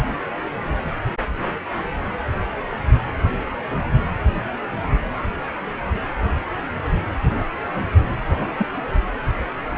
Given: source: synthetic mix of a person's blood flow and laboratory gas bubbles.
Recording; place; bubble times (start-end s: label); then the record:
Doppler ultrasound of blood flow; precordium
8.29-8.47 s: bubbles
8.58-8.68 s: bubbles
From the record:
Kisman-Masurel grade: 222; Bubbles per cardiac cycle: several, 3 to 8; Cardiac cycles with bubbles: 10 to 50%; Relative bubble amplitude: moderate (0.250 to 0.450); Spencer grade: 2 (many but less than half of the cardiac periods contain bubble signals, singularly or in groups); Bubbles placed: anywhere in the cardiac cycle